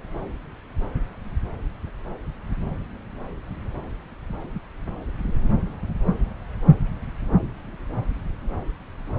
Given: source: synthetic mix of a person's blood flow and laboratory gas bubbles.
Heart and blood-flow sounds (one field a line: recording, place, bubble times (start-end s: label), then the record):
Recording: Doppler ultrasound of blood flow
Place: subclavian vein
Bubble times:
no bubbles
From the record:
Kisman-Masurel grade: 000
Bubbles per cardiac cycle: 0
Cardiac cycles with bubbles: 0%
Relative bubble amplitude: no bubbles discernible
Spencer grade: 0 (complete lack of bubble signals)